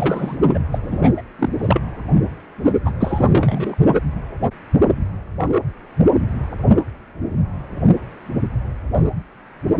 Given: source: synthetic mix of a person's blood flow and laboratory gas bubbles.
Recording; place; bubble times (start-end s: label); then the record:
Doppler ultrasound of blood flow; precordium
0.00-0.38 s: bubbles
0.54-0.59 s: bubbles
0.72-0.79 s: bubbles
0.83-1.10 s: bubbles
1.17-1.21 s: bubbles
1.39-1.49 s: bubbles
1.59-1.82 s: bubbles
2.64-2.73 s: bubbles
2.85-2.91 s: bubbles
3.00-3.76 s: bubbles
From the record:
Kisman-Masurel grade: 332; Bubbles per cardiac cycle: rolling drumbeat, 9 or more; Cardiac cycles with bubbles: 50 to 99%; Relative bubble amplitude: moderate (0.250 to 0.450); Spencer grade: 3 (all of the cardiac periods contain showers or single bubble signals, but not dominating or overriding the cardiac motion signals); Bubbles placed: only in the low amplitude regions of the cardiac cycle